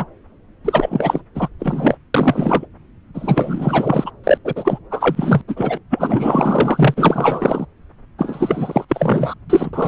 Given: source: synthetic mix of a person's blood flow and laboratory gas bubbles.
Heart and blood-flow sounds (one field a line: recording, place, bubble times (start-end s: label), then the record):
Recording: Doppler ultrasound of blood flow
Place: subclavian vein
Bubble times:
0.00-0.05 s: bubbles
0.65-1.21 s: bubbles
1.34-1.48 s: bubbles
1.59-1.95 s: bubbles
2.14-2.65 s: bubbles
3.14-4.11 s: bubbles
4.24-4.38 s: bubbles
4.45-4.53 s: bubbles
4.56-4.79 s: bubbles
4.91-5.42 s: bubbles
5.48-5.78 s: bubbles
5.90-6.94 s: bubbles
6.97-7.66 s: bubbles
8.18-8.85 s: bubbles
8.88-9.34 s: bubbles
9.49-9.88 s: bubbles
From the record:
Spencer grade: 4 (maximum detectable bubble signal sounding continuously throughout systole and diastole of every cardiac period, and overriding the amplitude of the normal cardiac signals)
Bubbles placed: anywhere in the cardiac cycle